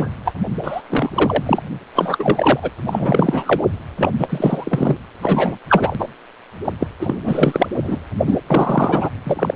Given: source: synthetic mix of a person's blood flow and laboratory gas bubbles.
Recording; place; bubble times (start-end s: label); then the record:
Doppler ultrasound of blood flow; precordium
0.00-0.08 s: bubbles
0.24-0.33 s: bubbles
0.64-0.81 s: bubbles
0.90-1.10 s: bubbles
1.15-1.62 s: bubbles
1.94-2.71 s: bubbles
2.88-3.62 s: bubbles
3.97-4.12 s: bubbles
4.19-4.97 s: bubbles
5.21-5.58 s: bubbles
5.69-6.08 s: bubbles
6.64-6.72 s: bubbles
6.79-6.86 s: bubbles
7.00-7.18 s: bubbles
7.25-7.76 s: bubbles
7.83-7.99 s: bubbles
8.26-8.37 s: bubbles
8.50-9.09 s: bubbles
9.25-9.56 s: bubbles
From the record:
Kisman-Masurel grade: 333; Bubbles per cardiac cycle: rolling drumbeat, 9 or more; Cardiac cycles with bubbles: 50 to 99%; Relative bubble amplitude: loud (0.450 to 0.775); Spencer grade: 3 (all of the cardiac periods contain showers or single bubble signals, but not dominating or overriding the cardiac motion signals); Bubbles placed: anywhere in the cardiac cycle